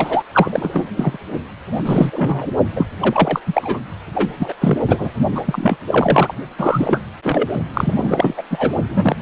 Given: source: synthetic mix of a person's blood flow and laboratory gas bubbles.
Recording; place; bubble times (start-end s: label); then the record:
Doppler ultrasound of blood flow; precordium
0.00-0.23 s: bubbles
0.33-0.90 s: bubbles
0.97-1.18 s: bubbles
1.71-1.83 s: bubbles
1.85-2.48 s: bubbles
2.75-2.85 s: bubbles
3.00-3.40 s: bubbles
3.46-3.79 s: bubbles
4.14-4.30 s: bubbles
4.39-4.54 s: bubbles
4.61-4.78 s: bubbles
4.87-5.11 s: bubbles
5.35-5.43 s: bubbles
5.46-5.77 s: bubbles
5.87-6.35 s: bubbles
6.57-7.01 s: bubbles
7.23-7.49 s: bubbles
7.73-8.42 s: bubbles
8.50-8.72 s: bubbles
8.89-9.16 s: bubbles
From the record:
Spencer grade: 3 (all of the cardiac periods contain showers or single bubble signals, but not dominating or overriding the cardiac motion signals); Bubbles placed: only in the low amplitude regions of the cardiac cycle